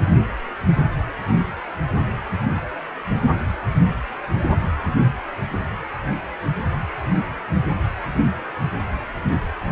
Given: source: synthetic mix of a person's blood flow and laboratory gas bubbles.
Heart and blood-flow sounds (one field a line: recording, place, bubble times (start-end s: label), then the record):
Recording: Doppler ultrasound of blood flow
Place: precordium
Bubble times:
no bubbles
From the record:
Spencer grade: 0 (complete lack of bubble signals)